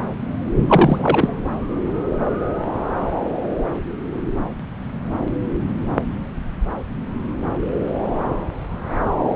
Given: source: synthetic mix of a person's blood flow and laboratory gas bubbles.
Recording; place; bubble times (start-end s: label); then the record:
Doppler ultrasound of blood flow; subclavian vein
0.68-1.38 s: bubbles
From the record:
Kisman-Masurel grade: 213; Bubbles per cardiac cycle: several, 3 to 8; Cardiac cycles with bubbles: 1 to 10%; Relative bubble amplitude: loud (0.450 to 0.775); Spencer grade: 1 (occasional bubble signal discernible with the cardiac motion signal, with majority of cardiac periods free of bubbles); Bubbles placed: anywhere in the cardiac cycle